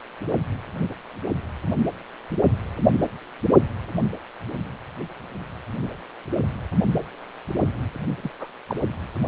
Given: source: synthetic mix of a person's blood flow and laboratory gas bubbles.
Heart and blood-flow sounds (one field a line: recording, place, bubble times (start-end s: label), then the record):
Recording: Doppler ultrasound of blood flow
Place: precordium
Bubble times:
8.23-8.29 s: bubbles
8.39-8.47 s: bubbles
8.67-8.76 s: bubbles
From the record:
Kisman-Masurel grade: 221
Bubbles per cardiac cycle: several, 3 to 8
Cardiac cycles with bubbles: 10 to 50%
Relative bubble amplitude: barely perceptible (0.100 to 0.250)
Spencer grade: 2 (many but less than half of the cardiac periods contain bubble signals, singularly or in groups)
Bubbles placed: anywhere in the cardiac cycle